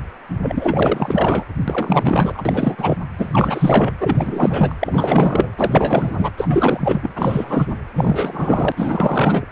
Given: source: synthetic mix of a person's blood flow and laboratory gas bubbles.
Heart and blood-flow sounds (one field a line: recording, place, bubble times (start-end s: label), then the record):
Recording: Doppler ultrasound of blood flow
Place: precordium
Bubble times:
0.43-1.44 s: bubbles
1.68-2.42 s: bubbles
2.45-2.97 s: bubbles
3.17-3.94 s: bubbles
3.98-4.75 s: bubbles
4.80-5.53 s: bubbles
5.57-6.30 s: bubbles
6.37-7.12 s: bubbles
7.15-7.74 s: bubbles
7.95-8.72 s: bubbles
8.76-9.46 s: bubbles
From the record:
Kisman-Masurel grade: 444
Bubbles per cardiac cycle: continuous sound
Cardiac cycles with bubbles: 100%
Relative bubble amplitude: maximal (0.775 to 0.999)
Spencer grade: 4 (maximum detectable bubble signal sounding continuously throughout systole and diastole of every cardiac period, and overriding the amplitude of the normal cardiac signals)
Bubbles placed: anywhere in the cardiac cycle